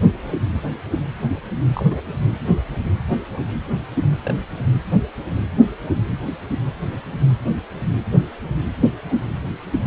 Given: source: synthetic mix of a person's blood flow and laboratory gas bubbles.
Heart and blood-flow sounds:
Doppler ultrasound of blood flow; precordium
1.75-1.86 s: bubbles
1.90-2.01 s: bubbles
4.23-4.33 s: bubbles
From the record:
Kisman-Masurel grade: 111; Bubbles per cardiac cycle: 1 to 2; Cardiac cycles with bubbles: 1 to 10%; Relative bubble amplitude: barely perceptible (0.100 to 0.250); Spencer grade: 1 (occasional bubble signal discernible with the cardiac motion signal, with majority of cardiac periods free of bubbles); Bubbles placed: anywhere in the cardiac cycle

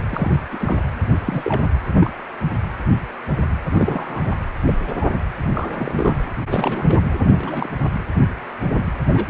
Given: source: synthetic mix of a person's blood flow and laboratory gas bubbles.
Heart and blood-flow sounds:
Doppler ultrasound of blood flow; precordium
0.09-0.37 s: bubbles
0.51-0.80 s: bubbles
1.25-1.65 s: bubbles
1.95-2.10 s: bubbles
3.70-4.33 s: bubbles
4.67-4.76 s: bubbles
4.87-4.93 s: bubbles
4.96-5.06 s: bubbles
5.52-6.19 s: bubbles
6.47-6.99 s: bubbles
7.20-7.70 s: bubbles
9.06-9.30 s: bubbles
From the record:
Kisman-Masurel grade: 232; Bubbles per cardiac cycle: several, 3 to 8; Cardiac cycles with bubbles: 50 to 99%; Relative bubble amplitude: moderate (0.250 to 0.450); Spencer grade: 3 (all of the cardiac periods contain showers or single bubble signals, but not dominating or overriding the cardiac motion signals); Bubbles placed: anywhere in the cardiac cycle

